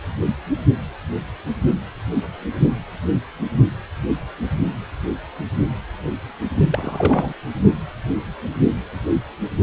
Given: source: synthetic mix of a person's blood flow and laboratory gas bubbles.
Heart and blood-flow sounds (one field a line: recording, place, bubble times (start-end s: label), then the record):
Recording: Doppler ultrasound of blood flow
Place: precordium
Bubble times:
6.70-7.33 s: bubbles
From the record:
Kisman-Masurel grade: 223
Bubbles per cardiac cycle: several, 3 to 8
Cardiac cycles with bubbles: 10 to 50%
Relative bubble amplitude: loud (0.450 to 0.775)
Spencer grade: 2 (many but less than half of the cardiac periods contain bubble signals, singularly or in groups)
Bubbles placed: only in the low amplitude regions of the cardiac cycle